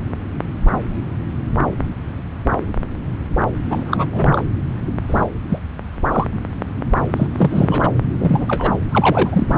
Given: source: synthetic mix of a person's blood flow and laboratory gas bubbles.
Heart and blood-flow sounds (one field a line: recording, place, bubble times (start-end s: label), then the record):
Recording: Doppler ultrasound of blood flow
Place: subclavian vein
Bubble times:
3.69-4.05 s: bubbles
4.12-4.44 s: bubbles
5.08-5.25 s: bubbles
5.49-5.58 s: bubbles
6.11-6.28 s: bubbles
7.16-7.27 s: bubbles
7.33-7.89 s: bubbles
8.19-8.73 s: bubbles
8.91-9.57 s: bubbles
From the record:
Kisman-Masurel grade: 232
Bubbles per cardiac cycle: several, 3 to 8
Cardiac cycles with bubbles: 50 to 99%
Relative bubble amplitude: moderate (0.250 to 0.450)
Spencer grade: 3 (all of the cardiac periods contain showers or single bubble signals, but not dominating or overriding the cardiac motion signals)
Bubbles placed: anywhere in the cardiac cycle